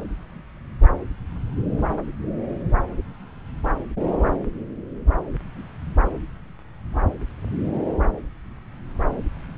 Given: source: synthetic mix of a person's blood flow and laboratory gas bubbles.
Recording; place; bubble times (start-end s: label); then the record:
Doppler ultrasound of blood flow; subclavian vein
no bubbles
From the record:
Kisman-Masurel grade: 000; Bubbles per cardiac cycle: 0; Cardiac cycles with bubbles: 0%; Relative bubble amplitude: no bubbles discernible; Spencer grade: 0 (complete lack of bubble signals)